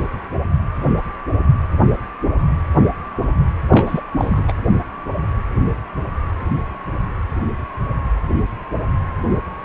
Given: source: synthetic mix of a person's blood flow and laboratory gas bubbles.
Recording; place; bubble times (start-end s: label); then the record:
Doppler ultrasound of blood flow; precordium
3.71-4.01 s: bubbles
4.18-4.44 s: bubbles
4.48-4.52 s: bubbles
From the record:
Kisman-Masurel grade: 212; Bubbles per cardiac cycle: several, 3 to 8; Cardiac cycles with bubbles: 1 to 10%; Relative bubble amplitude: moderate (0.250 to 0.450); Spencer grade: 1 (occasional bubble signal discernible with the cardiac motion signal, with majority of cardiac periods free of bubbles); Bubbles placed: anywhere in the cardiac cycle